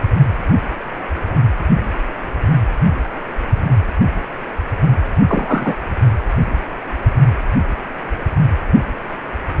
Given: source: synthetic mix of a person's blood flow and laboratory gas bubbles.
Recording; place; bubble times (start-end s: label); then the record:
Doppler ultrasound of blood flow; precordium
5.28-5.73 s: bubbles
From the record:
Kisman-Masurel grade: 113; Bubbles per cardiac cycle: 1 to 2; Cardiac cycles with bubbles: 1 to 10%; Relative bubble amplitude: loud (0.450 to 0.775); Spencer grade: 1 (occasional bubble signal discernible with the cardiac motion signal, with majority of cardiac periods free of bubbles); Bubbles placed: anywhere in the cardiac cycle